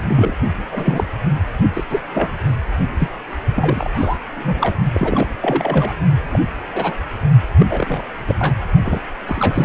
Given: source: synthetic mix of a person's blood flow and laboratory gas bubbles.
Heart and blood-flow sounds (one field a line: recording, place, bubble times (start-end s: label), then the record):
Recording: Doppler ultrasound of blood flow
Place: precordium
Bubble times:
0.08-0.34 s: bubbles
0.72-1.06 s: bubbles
1.73-1.84 s: bubbles
1.90-2.00 s: bubbles
2.13-2.31 s: bubbles
2.98-3.08 s: bubbles
3.56-3.90 s: bubbles
3.93-4.19 s: bubbles
4.36-4.77 s: bubbles
4.93-5.28 s: bubbles
5.41-5.93 s: bubbles
6.22-6.47 s: bubbles
6.72-6.96 s: bubbles
7.59-7.66 s: bubbles
7.70-8.02 s: bubbles
8.28-8.36 s: bubbles
8.39-8.54 s: bubbles
8.83-9.00 s: bubbles
9.27-9.65 s: bubbles
From the record:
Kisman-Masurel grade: 242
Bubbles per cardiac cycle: several, 3 to 8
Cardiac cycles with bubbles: 100%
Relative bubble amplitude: moderate (0.250 to 0.450)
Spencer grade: 3 (all of the cardiac periods contain showers or single bubble signals, but not dominating or overriding the cardiac motion signals)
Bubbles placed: only in the low amplitude regions of the cardiac cycle